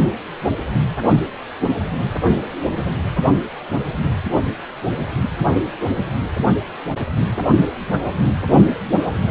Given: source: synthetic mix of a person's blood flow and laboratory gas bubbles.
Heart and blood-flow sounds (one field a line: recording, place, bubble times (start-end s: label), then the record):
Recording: Doppler ultrasound of blood flow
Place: precordium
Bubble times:
no bubbles
From the record:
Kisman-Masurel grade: 000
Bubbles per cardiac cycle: 0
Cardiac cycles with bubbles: 0%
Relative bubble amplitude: no bubbles discernible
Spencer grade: 0 (complete lack of bubble signals)